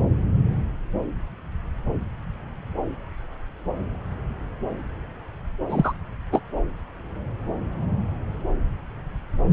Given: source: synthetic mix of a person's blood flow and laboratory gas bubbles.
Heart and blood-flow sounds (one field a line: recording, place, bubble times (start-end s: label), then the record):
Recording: Doppler ultrasound of blood flow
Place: subclavian vein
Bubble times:
5.70-5.93 s: bubbles
6.32-6.40 s: bubbles
From the record:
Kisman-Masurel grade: 213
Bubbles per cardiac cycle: several, 3 to 8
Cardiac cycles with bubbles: 1 to 10%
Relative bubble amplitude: loud (0.450 to 0.775)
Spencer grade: 1 (occasional bubble signal discernible with the cardiac motion signal, with majority of cardiac periods free of bubbles)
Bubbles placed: anywhere in the cardiac cycle